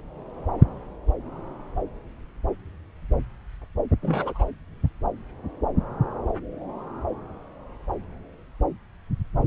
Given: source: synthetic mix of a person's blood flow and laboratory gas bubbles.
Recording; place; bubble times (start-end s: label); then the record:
Doppler ultrasound of blood flow; subclavian vein
4.02-4.45 s: bubbles
From the record:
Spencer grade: 1 (occasional bubble signal discernible with the cardiac motion signal, with majority of cardiac periods free of bubbles); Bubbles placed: anywhere in the cardiac cycle